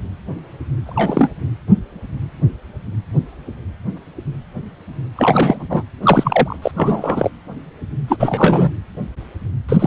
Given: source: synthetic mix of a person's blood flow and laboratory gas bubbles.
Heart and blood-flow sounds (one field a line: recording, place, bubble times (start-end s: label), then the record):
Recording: Doppler ultrasound of blood flow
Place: precordium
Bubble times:
0.84-1.31 s: bubbles
5.16-5.83 s: bubbles
6.02-6.56 s: bubbles
6.62-6.71 s: bubbles
6.76-7.30 s: bubbles
8.08-8.16 s: bubbles
8.20-8.70 s: bubbles
9.69-9.87 s: bubbles
From the record:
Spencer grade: 2 (many but less than half of the cardiac periods contain bubble signals, singularly or in groups)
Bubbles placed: anywhere in the cardiac cycle